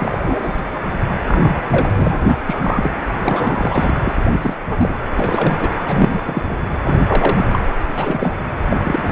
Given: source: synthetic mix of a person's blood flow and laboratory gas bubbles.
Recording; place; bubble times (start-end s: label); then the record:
Doppler ultrasound of blood flow; precordium
0.00-0.61 s: bubbles
1.27-1.61 s: bubbles
1.68-1.90 s: bubbles
1.94-2.17 s: bubbles
2.24-2.38 s: bubbles
2.46-2.92 s: bubbles
3.19-3.95 s: bubbles
4.04-4.13 s: bubbles
4.31-4.55 s: bubbles
4.70-4.96 s: bubbles
5.16-5.70 s: bubbles
5.85-6.42 s: bubbles
6.48-6.55 s: bubbles
6.83-6.98 s: bubbles
7.06-7.59 s: bubbles
7.95-8.46 s: bubbles
8.71-8.77 s: bubbles
8.85-9.11 s: bubbles
From the record:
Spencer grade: 3 (all of the cardiac periods contain showers or single bubble signals, but not dominating or overriding the cardiac motion signals); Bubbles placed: anywhere in the cardiac cycle